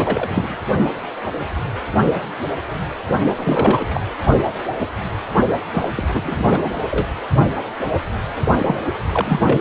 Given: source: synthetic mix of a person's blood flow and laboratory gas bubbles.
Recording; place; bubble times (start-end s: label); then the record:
Doppler ultrasound of blood flow; precordium
0.00-0.57 s: bubbles
3.37-4.01 s: bubbles
5.74-5.89 s: bubbles
5.97-6.71 s: bubbles
6.90-7.07 s: bubbles
8.57-8.75 s: bubbles
9.12-9.61 s: bubbles
From the record:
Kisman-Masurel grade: 332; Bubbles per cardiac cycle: rolling drumbeat, 9 or more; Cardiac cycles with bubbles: 50 to 99%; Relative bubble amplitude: moderate (0.250 to 0.450); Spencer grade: 3 (all of the cardiac periods contain showers or single bubble signals, but not dominating or overriding the cardiac motion signals); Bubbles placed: only in the low amplitude regions of the cardiac cycle